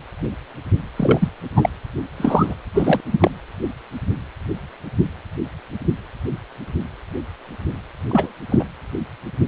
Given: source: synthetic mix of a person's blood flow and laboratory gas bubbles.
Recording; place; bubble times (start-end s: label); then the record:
Doppler ultrasound of blood flow; precordium
0.96-1.29 s: bubbles
1.56-1.70 s: bubbles
2.17-2.55 s: bubbles
2.73-3.00 s: bubbles
3.11-3.30 s: bubbles
8.11-8.33 s: bubbles
8.50-8.65 s: bubbles
From the record:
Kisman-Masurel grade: 223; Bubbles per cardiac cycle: several, 3 to 8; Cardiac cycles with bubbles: 10 to 50%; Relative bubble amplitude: loud (0.450 to 0.775); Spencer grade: 2 (many but less than half of the cardiac periods contain bubble signals, singularly or in groups); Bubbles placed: anywhere in the cardiac cycle